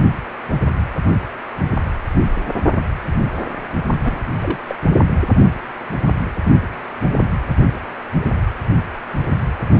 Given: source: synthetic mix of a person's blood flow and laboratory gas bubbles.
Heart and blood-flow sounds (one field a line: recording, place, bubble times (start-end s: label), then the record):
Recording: Doppler ultrasound of blood flow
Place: precordium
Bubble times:
4.04-4.17 s: bubbles
4.42-4.57 s: bubbles
4.67-4.75 s: bubbles
9.65-9.80 s: bubbles
From the record:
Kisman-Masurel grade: 121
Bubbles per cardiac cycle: 1 to 2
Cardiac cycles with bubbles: 10 to 50%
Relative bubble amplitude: barely perceptible (0.100 to 0.250)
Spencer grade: 2 (many but less than half of the cardiac periods contain bubble signals, singularly or in groups)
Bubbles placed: anywhere in the cardiac cycle